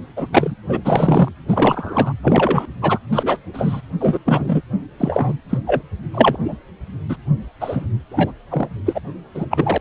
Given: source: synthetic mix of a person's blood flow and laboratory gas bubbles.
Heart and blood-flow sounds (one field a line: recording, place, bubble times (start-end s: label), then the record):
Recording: Doppler ultrasound of blood flow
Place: precordium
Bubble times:
0.16-0.28 s: bubbles
0.32-0.55 s: bubbles
0.69-0.80 s: bubbles
0.84-1.28 s: bubbles
1.48-2.13 s: bubbles
2.23-2.67 s: bubbles
2.81-2.98 s: bubbles
3.12-3.39 s: bubbles
3.54-3.81 s: bubbles
4.00-4.19 s: bubbles
4.26-4.61 s: bubbles
5.00-5.33 s: bubbles
5.50-5.58 s: bubbles
5.66-5.82 s: bubbles
6.14-6.37 s: bubbles
6.44-6.56 s: bubbles
7.09-7.17 s: bubbles
7.60-7.87 s: bubbles
8.11-8.31 s: bubbles
8.50-8.68 s: bubbles
8.85-9.01 s: bubbles
9.34-9.46 s: bubbles
9.50-9.78 s: bubbles
From the record:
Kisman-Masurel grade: 243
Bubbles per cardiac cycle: several, 3 to 8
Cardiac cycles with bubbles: 100%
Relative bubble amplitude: loud (0.450 to 0.775)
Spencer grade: 3 (all of the cardiac periods contain showers or single bubble signals, but not dominating or overriding the cardiac motion signals)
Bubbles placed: anywhere in the cardiac cycle